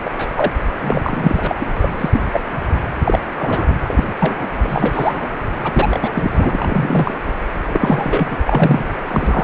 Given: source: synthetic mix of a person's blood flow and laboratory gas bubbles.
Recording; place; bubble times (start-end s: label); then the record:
Doppler ultrasound of blood flow; precordium
0.05-0.30 s: bubbles
0.36-0.52 s: bubbles
0.82-1.56 s: bubbles
1.59-1.66 s: bubbles
1.82-1.92 s: bubbles
1.98-2.22 s: bubbles
2.33-2.40 s: bubbles
3.04-3.20 s: bubbles
3.39-3.75 s: bubbles
3.83-4.04 s: bubbles
4.20-4.47 s: bubbles
4.62-5.28 s: bubbles
5.63-6.09 s: bubbles
6.12-6.30 s: bubbles
6.33-7.14 s: bubbles
7.67-8.39 s: bubbles
8.46-8.95 s: bubbles
9.08-9.44 s: bubbles
From the record:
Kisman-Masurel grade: 243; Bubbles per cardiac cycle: several, 3 to 8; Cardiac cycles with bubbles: 100%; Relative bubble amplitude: loud (0.450 to 0.775); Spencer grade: 3 (all of the cardiac periods contain showers or single bubble signals, but not dominating or overriding the cardiac motion signals); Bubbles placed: anywhere in the cardiac cycle